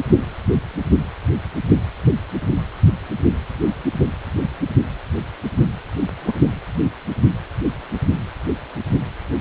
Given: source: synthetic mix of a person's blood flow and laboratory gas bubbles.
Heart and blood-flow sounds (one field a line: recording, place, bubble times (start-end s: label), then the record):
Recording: Doppler ultrasound of blood flow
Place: precordium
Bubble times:
6.23-6.33 s: bubbles
From the record:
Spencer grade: 2 (many but less than half of the cardiac periods contain bubble signals, singularly or in groups)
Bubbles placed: only in the low amplitude regions of the cardiac cycle